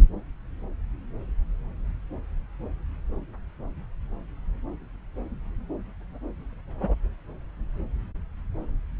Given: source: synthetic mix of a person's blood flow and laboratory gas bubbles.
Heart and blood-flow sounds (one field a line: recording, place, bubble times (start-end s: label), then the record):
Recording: Doppler ultrasound of blood flow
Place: subclavian vein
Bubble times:
6.80-6.94 s: bubbles
From the record:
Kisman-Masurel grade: 122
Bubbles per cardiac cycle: 1 to 2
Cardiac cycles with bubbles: 10 to 50%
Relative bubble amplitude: moderate (0.250 to 0.450)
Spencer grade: 2 (many but less than half of the cardiac periods contain bubble signals, singularly or in groups)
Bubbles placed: anywhere in the cardiac cycle